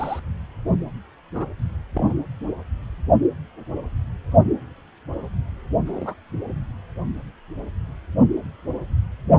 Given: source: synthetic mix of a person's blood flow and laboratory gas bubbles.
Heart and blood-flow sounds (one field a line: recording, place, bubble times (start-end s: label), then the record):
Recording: Doppler ultrasound of blood flow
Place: precordium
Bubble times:
0.00-0.20 s: bubbles
1.34-1.45 s: bubbles
1.94-2.13 s: bubbles
5.87-6.14 s: bubbles
From the record:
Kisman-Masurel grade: 121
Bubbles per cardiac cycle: 1 to 2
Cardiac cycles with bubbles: 10 to 50%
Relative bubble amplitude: barely perceptible (0.100 to 0.250)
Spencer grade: 2 (many but less than half of the cardiac periods contain bubble signals, singularly or in groups)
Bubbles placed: anywhere in the cardiac cycle